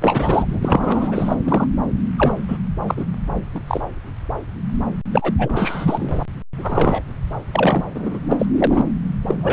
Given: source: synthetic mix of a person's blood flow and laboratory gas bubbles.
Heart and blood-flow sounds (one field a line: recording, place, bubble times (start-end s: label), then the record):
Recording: Doppler ultrasound of blood flow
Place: subclavian vein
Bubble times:
0.00-1.36 s: bubbles
1.44-1.68 s: bubbles
2.17-2.34 s: bubbles
2.48-2.58 s: bubbles
2.87-3.05 s: bubbles
3.54-3.61 s: bubbles
3.67-3.81 s: bubbles
5.12-5.34 s: bubbles
5.38-6.18 s: bubbles
6.57-7.03 s: bubbles
7.51-7.84 s: bubbles
7.95-8.19 s: bubbles
8.31-8.81 s: bubbles
9.26-9.53 s: bubbles
From the record:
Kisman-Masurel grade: 333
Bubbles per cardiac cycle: rolling drumbeat, 9 or more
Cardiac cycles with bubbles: 50 to 99%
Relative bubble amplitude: loud (0.450 to 0.775)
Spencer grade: 3 (all of the cardiac periods contain showers or single bubble signals, but not dominating or overriding the cardiac motion signals)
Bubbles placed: anywhere in the cardiac cycle